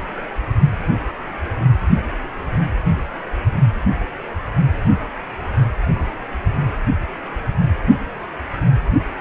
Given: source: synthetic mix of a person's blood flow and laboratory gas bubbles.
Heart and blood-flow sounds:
Doppler ultrasound of blood flow; precordium
no bubbles
From the record:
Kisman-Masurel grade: 000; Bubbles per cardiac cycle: 0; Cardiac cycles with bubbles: 0%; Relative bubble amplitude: no bubbles discernible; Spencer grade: 0 (complete lack of bubble signals)

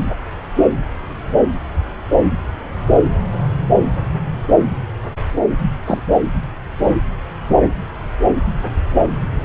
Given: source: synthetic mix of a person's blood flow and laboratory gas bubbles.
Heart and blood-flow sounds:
Doppler ultrasound of blood flow; subclavian vein
5.86-6.01 s: bubbles
From the record:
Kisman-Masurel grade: 113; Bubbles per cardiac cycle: 1 to 2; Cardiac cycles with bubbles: 1 to 10%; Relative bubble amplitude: loud (0.450 to 0.775); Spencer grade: 1 (occasional bubble signal discernible with the cardiac motion signal, with majority of cardiac periods free of bubbles); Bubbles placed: anywhere in the cardiac cycle

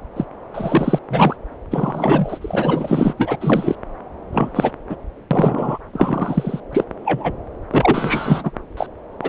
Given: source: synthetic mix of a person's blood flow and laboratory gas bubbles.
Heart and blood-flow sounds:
Doppler ultrasound of blood flow; subclavian vein
0.16-0.25 s: bubbles
0.54-0.99 s: bubbles
1.10-1.36 s: bubbles
1.71-3.13 s: bubbles
3.17-3.36 s: bubbles
3.40-3.75 s: bubbles
4.32-4.71 s: bubbles
4.89-4.96 s: bubbles
5.30-5.79 s: bubbles
5.93-6.60 s: bubbles
6.72-6.84 s: bubbles
7.04-7.33 s: bubbles
7.71-8.51 s: bubbles
8.77-8.87 s: bubbles
9.22-9.29 s: bubbles
From the record:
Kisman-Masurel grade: 243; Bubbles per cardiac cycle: several, 3 to 8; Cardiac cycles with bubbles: 100%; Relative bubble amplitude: loud (0.450 to 0.775); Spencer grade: 3 (all of the cardiac periods contain showers or single bubble signals, but not dominating or overriding the cardiac motion signals); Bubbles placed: anywhere in the cardiac cycle

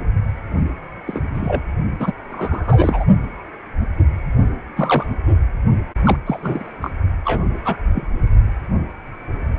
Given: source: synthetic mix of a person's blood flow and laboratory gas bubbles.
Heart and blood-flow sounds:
Doppler ultrasound of blood flow; precordium
1.07-1.21 s: bubbles
1.33-1.62 s: bubbles
1.99-2.12 s: bubbles
2.30-3.05 s: bubbles
4.77-5.07 s: bubbles
6.04-6.18 s: bubbles
6.26-6.74 s: bubbles
6.82-6.90 s: bubbles
7.25-7.45 s: bubbles
7.65-7.77 s: bubbles
7.94-8.07 s: bubbles
From the record:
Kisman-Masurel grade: 232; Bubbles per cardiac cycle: several, 3 to 8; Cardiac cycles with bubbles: 50 to 99%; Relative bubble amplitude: moderate (0.250 to 0.450); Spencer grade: 3 (all of the cardiac periods contain showers or single bubble signals, but not dominating or overriding the cardiac motion signals); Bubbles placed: only in the low amplitude regions of the cardiac cycle

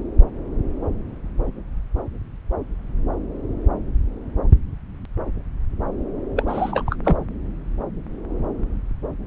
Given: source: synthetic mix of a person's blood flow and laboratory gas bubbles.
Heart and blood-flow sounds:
Doppler ultrasound of blood flow; subclavian vein
6.36-6.43 s: bubbles
6.47-6.96 s: bubbles
7.04-7.25 s: bubbles
From the record:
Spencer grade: 2 (many but less than half of the cardiac periods contain bubble signals, singularly or in groups); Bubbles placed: anywhere in the cardiac cycle

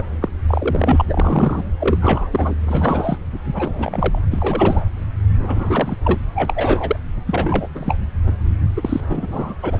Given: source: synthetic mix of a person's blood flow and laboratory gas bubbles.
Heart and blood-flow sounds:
Doppler ultrasound of blood flow; subclavian vein
0.00-0.02 s: bubbles
0.21-0.28 s: bubbles
0.48-1.05 s: bubbles
1.07-1.64 s: bubbles
1.80-2.29 s: bubbles
2.31-2.54 s: bubbles
2.63-3.18 s: bubbles
3.54-4.18 s: bubbles
4.30-4.85 s: bubbles
5.38-5.96 s: bubbles
6.04-6.20 s: bubbles
6.35-6.96 s: bubbles
7.26-7.67 s: bubbles
7.75-7.96 s: bubbles
8.26-8.32 s: bubbles
8.76-9.01 s: bubbles
9.08-9.54 s: bubbles
9.62-9.80 s: bubbles
From the record:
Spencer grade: 3 (all of the cardiac periods contain showers or single bubble signals, but not dominating or overriding the cardiac motion signals); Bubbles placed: anywhere in the cardiac cycle

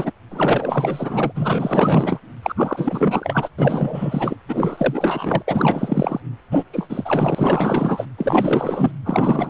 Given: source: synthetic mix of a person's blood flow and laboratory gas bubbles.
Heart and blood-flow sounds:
Doppler ultrasound of blood flow; precordium
0.00-0.11 s: bubbles
0.30-2.19 s: bubbles
2.42-3.49 s: bubbles
3.58-4.37 s: bubbles
4.48-5.42 s: bubbles
5.47-6.21 s: bubbles
6.51-6.63 s: bubbles
6.72-8.05 s: bubbles
8.18-8.91 s: bubbles
9.04-9.50 s: bubbles
From the record:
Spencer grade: 4 (maximum detectable bubble signal sounding continuously throughout systole and diastole of every cardiac period, and overriding the amplitude of the normal cardiac signals); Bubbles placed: anywhere in the cardiac cycle

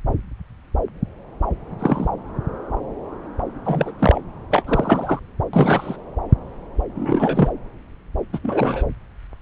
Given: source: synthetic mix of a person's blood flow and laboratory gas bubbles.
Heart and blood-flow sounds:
Doppler ultrasound of blood flow; subclavian vein
1.78-2.08 s: bubbles
3.64-3.92 s: bubbles
3.99-4.21 s: bubbles
4.50-4.63 s: bubbles
4.66-5.19 s: bubbles
5.53-5.96 s: bubbles
6.95-7.48 s: bubbles
8.33-8.39 s: bubbles
8.43-8.84 s: bubbles
From the record:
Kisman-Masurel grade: 223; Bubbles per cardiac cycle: several, 3 to 8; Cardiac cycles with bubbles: 10 to 50%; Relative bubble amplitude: loud (0.450 to 0.775); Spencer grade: 2 (many but less than half of the cardiac periods contain bubble signals, singularly or in groups); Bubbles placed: anywhere in the cardiac cycle

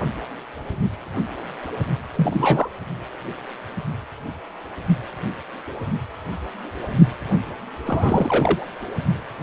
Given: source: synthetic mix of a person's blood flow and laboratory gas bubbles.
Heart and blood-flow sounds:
Doppler ultrasound of blood flow; precordium
2.15-2.69 s: bubbles
7.86-8.67 s: bubbles
From the record:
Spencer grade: 2 (many but less than half of the cardiac periods contain bubble signals, singularly or in groups); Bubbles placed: anywhere in the cardiac cycle

